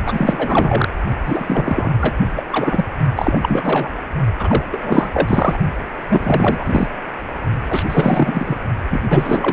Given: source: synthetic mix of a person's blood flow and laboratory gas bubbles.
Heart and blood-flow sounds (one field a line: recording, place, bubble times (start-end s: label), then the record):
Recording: Doppler ultrasound of blood flow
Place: precordium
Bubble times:
0.05-0.88 s: bubbles
1.25-1.44 s: bubbles
1.47-1.94 s: bubbles
1.98-2.15 s: bubbles
2.19-2.27 s: bubbles
2.35-2.42 s: bubbles
2.50-2.84 s: bubbles
3.15-3.89 s: bubbles
4.38-4.64 s: bubbles
4.72-4.78 s: bubbles
4.81-5.10 s: bubbles
5.13-5.59 s: bubbles
6.09-6.88 s: bubbles
7.69-7.83 s: bubbles
7.89-8.57 s: bubbles
8.91-9.02 s: bubbles
9.09-9.53 s: bubbles
From the record:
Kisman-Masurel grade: 444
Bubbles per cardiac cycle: continuous sound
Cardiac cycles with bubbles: 100%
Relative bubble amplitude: maximal (0.775 to 0.999)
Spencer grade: 4 (maximum detectable bubble signal sounding continuously throughout systole and diastole of every cardiac period, and overriding the amplitude of the normal cardiac signals)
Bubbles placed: only in the low amplitude regions of the cardiac cycle